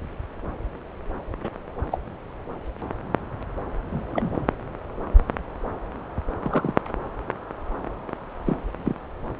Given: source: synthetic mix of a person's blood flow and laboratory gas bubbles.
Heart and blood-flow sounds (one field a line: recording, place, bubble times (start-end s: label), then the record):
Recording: Doppler ultrasound of blood flow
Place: subclavian vein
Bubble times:
1.44-1.51 s: bubbles
1.91-1.99 s: bubbles
3.90-4.47 s: bubbles
6.42-6.73 s: bubbles
8.46-8.56 s: bubbles
8.84-8.96 s: bubbles
From the record:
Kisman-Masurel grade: 122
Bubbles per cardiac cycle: 1 to 2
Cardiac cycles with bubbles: 10 to 50%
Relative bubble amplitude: moderate (0.250 to 0.450)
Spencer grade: 2 (many but less than half of the cardiac periods contain bubble signals, singularly or in groups)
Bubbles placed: anywhere in the cardiac cycle